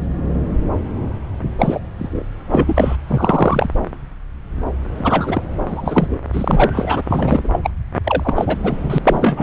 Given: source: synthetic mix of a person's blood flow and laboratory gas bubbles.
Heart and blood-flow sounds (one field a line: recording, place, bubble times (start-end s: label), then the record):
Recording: Doppler ultrasound of blood flow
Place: subclavian vein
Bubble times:
1.58-1.80 s: bubbles
1.98-2.25 s: bubbles
2.50-2.96 s: bubbles
3.07-3.69 s: bubbles
4.97-5.42 s: bubbles
5.66-6.20 s: bubbles
6.33-7.03 s: bubbles
7.09-7.59 s: bubbles
7.63-7.70 s: bubbles
8.03-8.57 s: bubbles
8.63-8.98 s: bubbles
9.03-9.43 s: bubbles
From the record:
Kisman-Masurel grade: 233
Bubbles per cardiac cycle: several, 3 to 8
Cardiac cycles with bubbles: 50 to 99%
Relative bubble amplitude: loud (0.450 to 0.775)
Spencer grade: 3 (all of the cardiac periods contain showers or single bubble signals, but not dominating or overriding the cardiac motion signals)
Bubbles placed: anywhere in the cardiac cycle